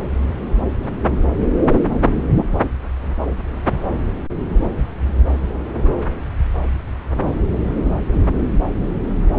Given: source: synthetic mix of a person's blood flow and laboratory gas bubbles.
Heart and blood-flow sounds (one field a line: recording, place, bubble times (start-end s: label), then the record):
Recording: Doppler ultrasound of blood flow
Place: subclavian vein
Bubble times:
no bubbles
From the record:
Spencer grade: 0 (complete lack of bubble signals)